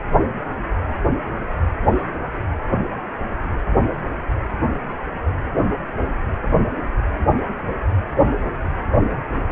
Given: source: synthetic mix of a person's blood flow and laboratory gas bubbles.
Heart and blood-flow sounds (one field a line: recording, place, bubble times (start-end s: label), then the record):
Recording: Doppler ultrasound of blood flow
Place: precordium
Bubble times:
no bubbles
From the record:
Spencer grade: 0 (complete lack of bubble signals)